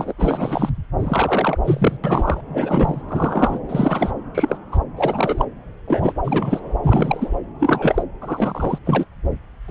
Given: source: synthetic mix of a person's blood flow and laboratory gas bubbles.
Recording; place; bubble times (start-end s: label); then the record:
Doppler ultrasound of blood flow; subclavian vein
0.00-0.13 s: bubbles
0.18-0.69 s: bubbles
0.99-1.58 s: bubbles
1.65-1.97 s: bubbles
2.03-2.41 s: bubbles
2.53-3.02 s: bubbles
3.08-3.59 s: bubbles
3.69-4.11 s: bubbles
4.34-4.58 s: bubbles
4.72-4.78 s: bubbles
4.96-5.46 s: bubbles
5.88-6.13 s: bubbles
6.24-6.60 s: bubbles
6.83-7.29 s: bubbles
7.60-8.03 s: bubbles
8.21-8.79 s: bubbles
8.85-9.04 s: bubbles
9.68-9.71 s: bubbles
From the record:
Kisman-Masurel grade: 242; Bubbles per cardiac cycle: several, 3 to 8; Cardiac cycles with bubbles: 100%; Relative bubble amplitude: moderate (0.250 to 0.450); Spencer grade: 3 (all of the cardiac periods contain showers or single bubble signals, but not dominating or overriding the cardiac motion signals); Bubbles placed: anywhere in the cardiac cycle